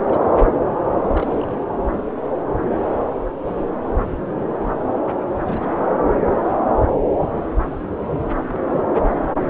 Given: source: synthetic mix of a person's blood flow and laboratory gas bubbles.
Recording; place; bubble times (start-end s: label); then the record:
Doppler ultrasound of blood flow; subclavian vein
0.07-0.20 s: bubbles
1.12-1.61 s: bubbles
5.37-5.88 s: bubbles
7.20-7.32 s: bubbles
7.37-7.43 s: bubbles
7.67-7.84 s: bubbles
8.09-8.23 s: bubbles
8.37-8.40 s: bubbles
8.46-8.82 s: bubbles
9.05-9.20 s: bubbles
9.32-9.50 s: bubbles
From the record:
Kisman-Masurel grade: 221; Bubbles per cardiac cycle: several, 3 to 8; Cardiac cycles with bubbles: 10 to 50%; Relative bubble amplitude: barely perceptible (0.100 to 0.250); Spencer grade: 2 (many but less than half of the cardiac periods contain bubble signals, singularly or in groups); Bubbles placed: anywhere in the cardiac cycle